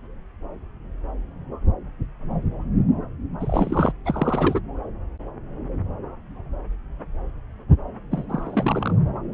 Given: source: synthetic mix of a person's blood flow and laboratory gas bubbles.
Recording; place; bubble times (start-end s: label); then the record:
Doppler ultrasound of blood flow; subclavian vein
3.40-3.92 s: bubbles
4.06-4.61 s: bubbles
8.11-8.25 s: bubbles
8.29-8.96 s: bubbles
From the record:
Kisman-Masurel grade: 222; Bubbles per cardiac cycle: several, 3 to 8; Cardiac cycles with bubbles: 10 to 50%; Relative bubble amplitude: moderate (0.250 to 0.450); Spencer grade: 2 (many but less than half of the cardiac periods contain bubble signals, singularly or in groups); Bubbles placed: anywhere in the cardiac cycle